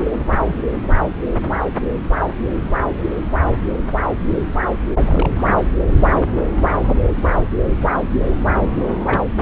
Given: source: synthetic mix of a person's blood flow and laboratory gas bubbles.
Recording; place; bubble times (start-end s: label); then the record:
Doppler ultrasound of blood flow; subclavian vein
0.08-0.18 s: bubbles
0.45-0.62 s: bubbles
5.06-5.54 s: bubbles
8.76-8.81 s: bubbles
8.87-8.96 s: bubbles
9.06-9.22 s: bubbles
From the record:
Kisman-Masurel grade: 221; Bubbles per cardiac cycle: several, 3 to 8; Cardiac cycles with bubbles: 10 to 50%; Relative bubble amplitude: barely perceptible (0.100 to 0.250); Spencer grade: 2 (many but less than half of the cardiac periods contain bubble signals, singularly or in groups); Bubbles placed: anywhere in the cardiac cycle